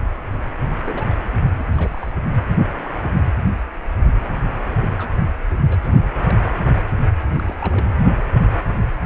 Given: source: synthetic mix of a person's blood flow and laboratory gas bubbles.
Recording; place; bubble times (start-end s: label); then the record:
Doppler ultrasound of blood flow; precordium
0.85-1.05 s: bubbles
1.07-1.18 s: bubbles
1.25-1.37 s: bubbles
1.54-1.66 s: bubbles
1.75-2.12 s: bubbles
2.23-2.31 s: bubbles
4.79-4.92 s: bubbles
4.98-5.15 s: bubbles
5.26-5.34 s: bubbles
5.67-5.91 s: bubbles
6.16-6.38 s: bubbles
7.33-7.86 s: bubbles
From the record:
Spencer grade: 2 (many but less than half of the cardiac periods contain bubble signals, singularly or in groups); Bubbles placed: anywhere in the cardiac cycle